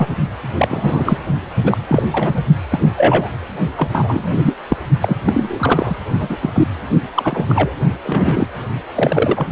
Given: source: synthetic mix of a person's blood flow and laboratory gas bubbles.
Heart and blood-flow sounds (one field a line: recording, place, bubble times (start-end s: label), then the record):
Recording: Doppler ultrasound of blood flow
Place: precordium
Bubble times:
0.00-0.08 s: bubbles
0.57-1.18 s: bubbles
1.63-1.78 s: bubbles
1.89-2.42 s: bubbles
2.69-3.28 s: bubbles
3.77-3.89 s: bubbles
3.92-4.54 s: bubbles
4.69-4.77 s: bubbles
5.01-5.17 s: bubbles
5.25-5.96 s: bubbles
6.20-6.38 s: bubbles
6.41-6.50 s: bubbles
6.54-6.68 s: bubbles
7.14-7.46 s: bubbles
7.48-7.73 s: bubbles
8.04-8.47 s: bubbles
8.95-9.47 s: bubbles
From the record:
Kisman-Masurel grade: 243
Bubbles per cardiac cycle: several, 3 to 8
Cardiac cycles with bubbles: 100%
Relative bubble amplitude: loud (0.450 to 0.775)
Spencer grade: 3 (all of the cardiac periods contain showers or single bubble signals, but not dominating or overriding the cardiac motion signals)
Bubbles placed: only in the low amplitude regions of the cardiac cycle